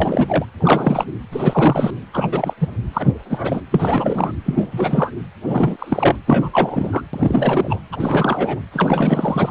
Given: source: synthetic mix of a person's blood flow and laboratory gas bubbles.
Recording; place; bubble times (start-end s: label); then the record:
Doppler ultrasound of blood flow; precordium
0.00-0.45 s: bubbles
0.60-1.05 s: bubbles
1.31-1.94 s: bubbles
2.13-2.28 s: bubbles
2.31-2.54 s: bubbles
2.60-2.68 s: bubbles
2.93-3.14 s: bubbles
3.25-3.62 s: bubbles
3.71-4.32 s: bubbles
4.44-4.67 s: bubbles
4.71-5.11 s: bubbles
5.47-6.15 s: bubbles
6.26-6.50 s: bubbles
6.53-7.02 s: bubbles
7.13-7.80 s: bubbles
7.92-7.96 s: bubbles
8.00-8.61 s: bubbles
8.72-9.51 s: bubbles
From the record:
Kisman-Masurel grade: 343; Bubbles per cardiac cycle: rolling drumbeat, 9 or more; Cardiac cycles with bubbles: 100%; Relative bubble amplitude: loud (0.450 to 0.775); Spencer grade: 3 (all of the cardiac periods contain showers or single bubble signals, but not dominating or overriding the cardiac motion signals); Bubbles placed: anywhere in the cardiac cycle